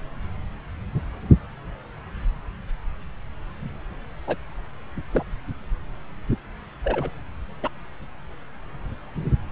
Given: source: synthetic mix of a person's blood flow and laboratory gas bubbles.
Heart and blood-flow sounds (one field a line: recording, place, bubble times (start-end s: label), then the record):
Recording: Doppler ultrasound of blood flow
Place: subclavian vein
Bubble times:
4.27-4.36 s: bubbles
5.12-5.25 s: bubbles
6.84-7.11 s: bubbles
7.62-7.69 s: bubbles
From the record:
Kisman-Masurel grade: 121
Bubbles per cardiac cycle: 1 to 2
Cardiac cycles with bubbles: 10 to 50%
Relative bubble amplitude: barely perceptible (0.100 to 0.250)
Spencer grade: 2 (many but less than half of the cardiac periods contain bubble signals, singularly or in groups)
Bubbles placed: anywhere in the cardiac cycle